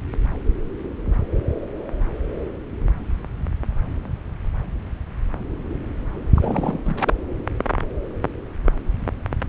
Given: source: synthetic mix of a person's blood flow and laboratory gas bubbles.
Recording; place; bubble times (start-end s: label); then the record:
Doppler ultrasound of blood flow; subclavian vein
6.36-6.79 s: bubbles
6.84-6.96 s: bubbles
7.00-7.13 s: bubbles
From the record:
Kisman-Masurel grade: 221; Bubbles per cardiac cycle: several, 3 to 8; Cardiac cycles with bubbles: 10 to 50%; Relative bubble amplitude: barely perceptible (0.100 to 0.250); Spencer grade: 2 (many but less than half of the cardiac periods contain bubble signals, singularly or in groups); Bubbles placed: anywhere in the cardiac cycle